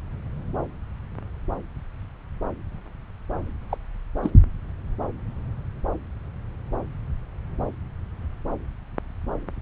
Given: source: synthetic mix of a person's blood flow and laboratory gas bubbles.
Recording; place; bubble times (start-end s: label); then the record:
Doppler ultrasound of blood flow; subclavian vein
3.69-3.77 s: bubbles
4.22-4.30 s: bubbles
From the record:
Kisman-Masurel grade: 122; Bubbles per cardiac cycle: 1 to 2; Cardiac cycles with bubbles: 10 to 50%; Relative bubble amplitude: moderate (0.250 to 0.450); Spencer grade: 2 (many but less than half of the cardiac periods contain bubble signals, singularly or in groups); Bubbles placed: anywhere in the cardiac cycle